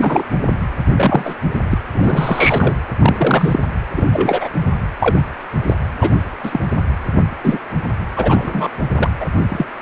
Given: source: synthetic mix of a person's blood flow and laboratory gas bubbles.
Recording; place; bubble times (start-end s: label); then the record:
Doppler ultrasound of blood flow; precordium
0.00-0.23 s: bubbles
0.94-1.35 s: bubbles
1.69-1.78 s: bubbles
1.94-2.75 s: bubbles
2.99-3.59 s: bubbles
3.95-4.07 s: bubbles
4.12-4.49 s: bubbles
5.00-5.23 s: bubbles
5.66-5.74 s: bubbles
6.01-6.12 s: bubbles
6.43-6.60 s: bubbles
7.43-7.59 s: bubbles
8.16-8.69 s: bubbles
8.91-9.10 s: bubbles
9.20-9.25 s: bubbles
9.49-9.64 s: bubbles
From the record:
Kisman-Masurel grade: 243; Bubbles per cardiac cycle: several, 3 to 8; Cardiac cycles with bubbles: 100%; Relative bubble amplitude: loud (0.450 to 0.775); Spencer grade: 3 (all of the cardiac periods contain showers or single bubble signals, but not dominating or overriding the cardiac motion signals); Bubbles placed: anywhere in the cardiac cycle